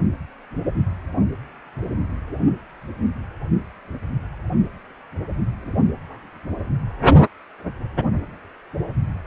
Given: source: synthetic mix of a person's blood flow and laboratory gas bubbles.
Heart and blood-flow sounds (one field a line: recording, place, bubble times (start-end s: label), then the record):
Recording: Doppler ultrasound of blood flow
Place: precordium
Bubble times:
no bubbles
From the record:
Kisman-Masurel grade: 000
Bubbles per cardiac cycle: 0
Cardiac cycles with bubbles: 0%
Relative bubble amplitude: no bubbles discernible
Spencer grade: 0 (complete lack of bubble signals)